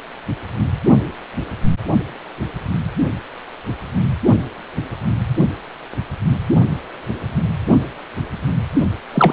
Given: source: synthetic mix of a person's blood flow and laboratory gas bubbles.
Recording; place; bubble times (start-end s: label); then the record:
Doppler ultrasound of blood flow; precordium
9.12-9.33 s: bubbles
From the record:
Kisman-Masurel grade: 213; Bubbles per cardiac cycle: several, 3 to 8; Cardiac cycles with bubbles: 1 to 10%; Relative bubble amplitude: loud (0.450 to 0.775); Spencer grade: 1 (occasional bubble signal discernible with the cardiac motion signal, with majority of cardiac periods free of bubbles); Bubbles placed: only in the low amplitude regions of the cardiac cycle